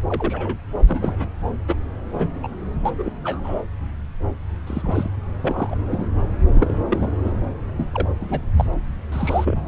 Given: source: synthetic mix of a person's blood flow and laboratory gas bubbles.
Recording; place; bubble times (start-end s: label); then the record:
Doppler ultrasound of blood flow; subclavian vein
0.08-0.57 s: bubbles
0.86-1.30 s: bubbles
1.68-1.75 s: bubbles
2.14-2.29 s: bubbles
2.42-2.48 s: bubbles
2.85-2.91 s: bubbles
2.98-3.12 s: bubbles
3.24-3.41 s: bubbles
3.44-3.60 s: bubbles
4.67-5.08 s: bubbles
5.44-5.76 s: bubbles
5.91-6.08 s: bubbles
6.53-6.77 s: bubbles
6.89-7.12 s: bubbles
7.24-7.34 s: bubbles
7.77-8.08 s: bubbles
8.20-8.40 s: bubbles
8.57-8.65 s: bubbles
9.12-9.61 s: bubbles
From the record:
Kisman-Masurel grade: 242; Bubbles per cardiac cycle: several, 3 to 8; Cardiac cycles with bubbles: 100%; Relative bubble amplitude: moderate (0.250 to 0.450); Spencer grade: 3 (all of the cardiac periods contain showers or single bubble signals, but not dominating or overriding the cardiac motion signals); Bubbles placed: anywhere in the cardiac cycle